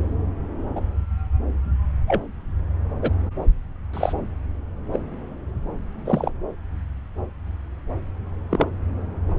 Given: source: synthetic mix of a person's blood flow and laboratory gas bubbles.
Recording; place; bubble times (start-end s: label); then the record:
Doppler ultrasound of blood flow; subclavian vein
0.76-0.81 s: bubbles
2.07-2.21 s: bubbles
3.01-3.10 s: bubbles
3.93-4.13 s: bubbles
4.92-4.99 s: bubbles
6.05-6.30 s: bubbles
8.50-8.66 s: bubbles
From the record:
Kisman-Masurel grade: 122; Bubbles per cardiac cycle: 1 to 2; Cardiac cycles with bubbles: 10 to 50%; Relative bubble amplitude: moderate (0.250 to 0.450); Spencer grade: 2 (many but less than half of the cardiac periods contain bubble signals, singularly or in groups); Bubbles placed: anywhere in the cardiac cycle